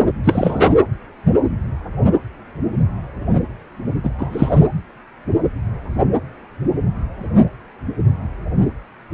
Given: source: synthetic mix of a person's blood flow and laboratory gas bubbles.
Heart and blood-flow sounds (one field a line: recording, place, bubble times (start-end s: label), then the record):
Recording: Doppler ultrasound of blood flow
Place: precordium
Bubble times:
0.24-0.75 s: bubbles
4.03-4.10 s: bubbles
4.18-4.67 s: bubbles
From the record:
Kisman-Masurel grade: 223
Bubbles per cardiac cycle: several, 3 to 8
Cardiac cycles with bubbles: 10 to 50%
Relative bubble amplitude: loud (0.450 to 0.775)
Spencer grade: 2 (many but less than half of the cardiac periods contain bubble signals, singularly or in groups)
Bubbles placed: anywhere in the cardiac cycle